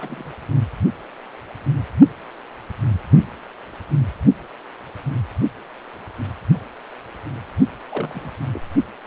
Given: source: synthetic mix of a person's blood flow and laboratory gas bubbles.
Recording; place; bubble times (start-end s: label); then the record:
Doppler ultrasound of blood flow; precordium
0.00-0.32 s: bubbles
7.89-8.30 s: bubbles
8.53-8.60 s: bubbles
From the record:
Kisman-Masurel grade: 221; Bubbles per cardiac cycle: several, 3 to 8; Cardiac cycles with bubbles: 10 to 50%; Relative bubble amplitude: barely perceptible (0.100 to 0.250); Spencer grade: 2 (many but less than half of the cardiac periods contain bubble signals, singularly or in groups); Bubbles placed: only in the low amplitude regions of the cardiac cycle